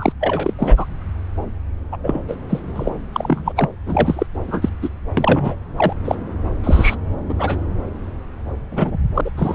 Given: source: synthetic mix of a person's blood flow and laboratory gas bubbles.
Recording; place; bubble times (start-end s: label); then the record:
Doppler ultrasound of blood flow; subclavian vein
0.00-0.12 s: bubbles
0.20-0.53 s: bubbles
0.58-0.86 s: bubbles
1.92-1.97 s: bubbles
2.03-2.21 s: bubbles
2.28-2.36 s: bubbles
2.49-2.59 s: bubbles
2.75-2.90 s: bubbles
3.12-3.52 s: bubbles
3.56-3.69 s: bubbles
3.87-4.26 s: bubbles
4.47-4.69 s: bubbles
4.82-4.89 s: bubbles
5.17-5.55 s: bubbles
5.76-5.93 s: bubbles
6.04-6.16 s: bubbles
6.63-6.96 s: bubbles
7.29-7.35 s: bubbles
7.38-7.60 s: bubbles
8.71-8.97 s: bubbles
9.14-9.21 s: bubbles
9.24-9.30 s: bubbles
9.37-9.55 s: bubbles
From the record:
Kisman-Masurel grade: 243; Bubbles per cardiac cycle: several, 3 to 8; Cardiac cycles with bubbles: 100%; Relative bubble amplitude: loud (0.450 to 0.775); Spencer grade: 3 (all of the cardiac periods contain showers or single bubble signals, but not dominating or overriding the cardiac motion signals); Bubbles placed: anywhere in the cardiac cycle